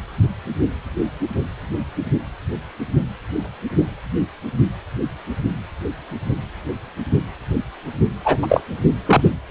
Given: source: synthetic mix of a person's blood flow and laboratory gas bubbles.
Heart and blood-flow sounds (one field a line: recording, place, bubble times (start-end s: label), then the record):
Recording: Doppler ultrasound of blood flow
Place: precordium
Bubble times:
8.24-8.37 s: bubbles
8.42-8.63 s: bubbles
9.05-9.22 s: bubbles
From the record:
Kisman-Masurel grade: 213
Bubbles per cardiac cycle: several, 3 to 8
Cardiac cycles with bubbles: 1 to 10%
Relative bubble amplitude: loud (0.450 to 0.775)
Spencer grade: 1 (occasional bubble signal discernible with the cardiac motion signal, with majority of cardiac periods free of bubbles)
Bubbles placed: only in the low amplitude regions of the cardiac cycle